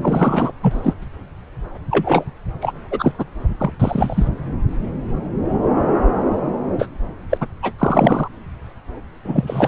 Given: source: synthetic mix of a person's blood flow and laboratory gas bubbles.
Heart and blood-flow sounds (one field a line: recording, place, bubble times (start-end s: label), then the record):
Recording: Doppler ultrasound of blood flow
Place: subclavian vein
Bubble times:
0.02-0.52 s: bubbles
0.62-0.94 s: bubbles
1.91-2.25 s: bubbles
2.62-2.72 s: bubbles
2.91-3.12 s: bubbles
3.18-3.25 s: bubbles
3.58-3.73 s: bubbles
3.80-4.29 s: bubbles
6.79-6.88 s: bubbles
7.29-7.38 s: bubbles
7.41-7.47 s: bubbles
7.62-7.74 s: bubbles
7.78-8.29 s: bubbles
9.24-9.68 s: bubbles
From the record:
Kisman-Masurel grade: 233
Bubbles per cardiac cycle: several, 3 to 8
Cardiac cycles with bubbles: 50 to 99%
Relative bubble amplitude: loud (0.450 to 0.775)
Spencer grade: 3 (all of the cardiac periods contain showers or single bubble signals, but not dominating or overriding the cardiac motion signals)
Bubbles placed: anywhere in the cardiac cycle